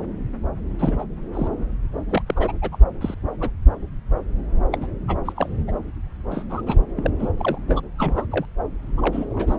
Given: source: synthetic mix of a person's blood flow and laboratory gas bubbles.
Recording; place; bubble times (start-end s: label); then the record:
Doppler ultrasound of blood flow; subclavian vein
0.79-1.04 s: bubbles
1.33-1.48 s: bubbles
2.09-2.22 s: bubbles
2.26-2.52 s: bubbles
2.62-2.77 s: bubbles
3.01-3.15 s: bubbles
3.40-3.50 s: bubbles
4.71-4.79 s: bubbles
4.81-4.87 s: bubbles
5.08-5.17 s: bubbles
5.25-5.33 s: bubbles
5.37-5.51 s: bubbles
5.67-5.72 s: bubbles
6.30-6.45 s: bubbles
6.50-6.62 s: bubbles
6.66-6.77 s: bubbles
6.96-7.11 s: bubbles
7.19-7.29 s: bubbles
7.37-7.58 s: bubbles
7.67-7.81 s: bubbles
7.98-8.26 s: bubbles
8.31-8.46 s: bubbles
8.97-9.25 s: bubbles
9.30-9.56 s: bubbles
From the record:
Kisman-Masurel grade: 232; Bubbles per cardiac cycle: several, 3 to 8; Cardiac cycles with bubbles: 50 to 99%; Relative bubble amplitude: moderate (0.250 to 0.450); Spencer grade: 3 (all of the cardiac periods contain showers or single bubble signals, but not dominating or overriding the cardiac motion signals); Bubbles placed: anywhere in the cardiac cycle